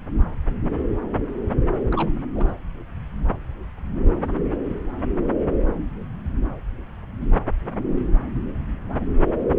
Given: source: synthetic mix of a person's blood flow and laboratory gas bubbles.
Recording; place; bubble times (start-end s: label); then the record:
Doppler ultrasound of blood flow; subclavian vein
1.92-2.09 s: bubbles
2.35-2.55 s: bubbles
From the record:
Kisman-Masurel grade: 121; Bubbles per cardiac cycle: 1 to 2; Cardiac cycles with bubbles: 10 to 50%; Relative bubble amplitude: barely perceptible (0.100 to 0.250); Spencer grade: 2 (many but less than half of the cardiac periods contain bubble signals, singularly or in groups); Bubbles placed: anywhere in the cardiac cycle